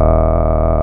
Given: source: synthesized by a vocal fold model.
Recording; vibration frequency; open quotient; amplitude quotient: sustained vowel; 40 Hz; 0.5; 1